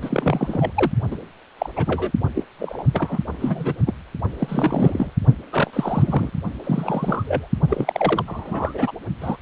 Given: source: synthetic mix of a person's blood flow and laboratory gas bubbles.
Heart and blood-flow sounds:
Doppler ultrasound of blood flow; precordium
0.01-0.72 s: bubbles
0.74-0.92 s: bubbles
1.10-1.16 s: bubbles
1.58-1.69 s: bubbles
1.76-2.12 s: bubbles
2.35-2.44 s: bubbles
2.58-2.83 s: bubbles
2.93-3.19 s: bubbles
3.41-3.74 s: bubbles
3.86-3.93 s: bubbles
4.38-5.11 s: bubbles
5.52-6.30 s: bubbles
6.63-7.48 s: bubbles
7.68-8.23 s: bubbles
8.28-8.92 s: bubbles
9.21-9.37 s: bubbles
From the record:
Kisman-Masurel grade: 242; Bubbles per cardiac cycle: several, 3 to 8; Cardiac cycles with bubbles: 100%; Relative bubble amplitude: moderate (0.250 to 0.450); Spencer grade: 3 (all of the cardiac periods contain showers or single bubble signals, but not dominating or overriding the cardiac motion signals); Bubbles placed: only in the low amplitude regions of the cardiac cycle

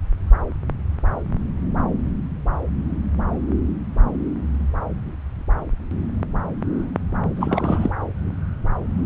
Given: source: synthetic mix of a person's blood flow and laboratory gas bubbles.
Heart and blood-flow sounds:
Doppler ultrasound of blood flow; subclavian vein
7.36-7.90 s: bubbles
From the record:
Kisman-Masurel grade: 212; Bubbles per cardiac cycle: several, 3 to 8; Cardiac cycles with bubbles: 1 to 10%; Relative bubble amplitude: moderate (0.250 to 0.450); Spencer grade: 1 (occasional bubble signal discernible with the cardiac motion signal, with majority of cardiac periods free of bubbles); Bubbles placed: anywhere in the cardiac cycle

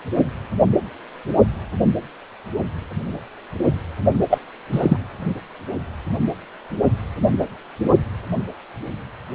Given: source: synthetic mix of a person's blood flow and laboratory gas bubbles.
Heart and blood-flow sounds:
Doppler ultrasound of blood flow; precordium
4.29-4.38 s: bubbles
4.71-4.98 s: bubbles
From the record:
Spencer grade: 1 (occasional bubble signal discernible with the cardiac motion signal, with majority of cardiac periods free of bubbles); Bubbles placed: only in the low amplitude regions of the cardiac cycle

